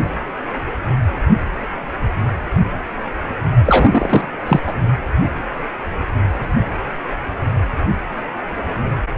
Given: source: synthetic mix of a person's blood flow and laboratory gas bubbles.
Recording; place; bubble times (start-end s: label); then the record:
Doppler ultrasound of blood flow; precordium
3.65-4.25 s: bubbles
4.46-4.60 s: bubbles
4.67-4.73 s: bubbles
From the record:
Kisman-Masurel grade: 213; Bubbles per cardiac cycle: several, 3 to 8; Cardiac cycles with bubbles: 1 to 10%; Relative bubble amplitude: loud (0.450 to 0.775); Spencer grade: 1 (occasional bubble signal discernible with the cardiac motion signal, with majority of cardiac periods free of bubbles); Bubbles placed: anywhere in the cardiac cycle